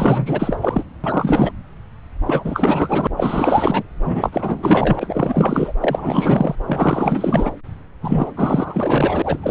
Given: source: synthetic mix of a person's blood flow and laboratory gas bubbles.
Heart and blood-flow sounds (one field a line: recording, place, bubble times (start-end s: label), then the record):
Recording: Doppler ultrasound of blood flow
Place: subclavian vein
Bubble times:
0.00-0.83 s: bubbles
1.03-1.51 s: bubbles
2.25-3.07 s: bubbles
3.17-3.83 s: bubbles
4.05-5.73 s: bubbles
5.81-6.56 s: bubbles
6.66-7.52 s: bubbles
8.01-8.32 s: bubbles
8.37-9.38 s: bubbles
9.42-9.51 s: bubbles
From the record:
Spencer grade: 4 (maximum detectable bubble signal sounding continuously throughout systole and diastole of every cardiac period, and overriding the amplitude of the normal cardiac signals)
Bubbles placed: anywhere in the cardiac cycle